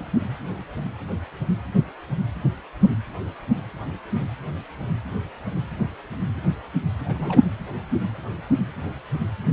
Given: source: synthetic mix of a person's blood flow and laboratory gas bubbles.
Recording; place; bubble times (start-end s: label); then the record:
Doppler ultrasound of blood flow; precordium
7.04-7.39 s: bubbles
From the record:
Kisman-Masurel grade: 111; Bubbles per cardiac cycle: 1 to 2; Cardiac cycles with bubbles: 1 to 10%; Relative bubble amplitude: barely perceptible (0.100 to 0.250); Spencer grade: 1 (occasional bubble signal discernible with the cardiac motion signal, with majority of cardiac periods free of bubbles); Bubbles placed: anywhere in the cardiac cycle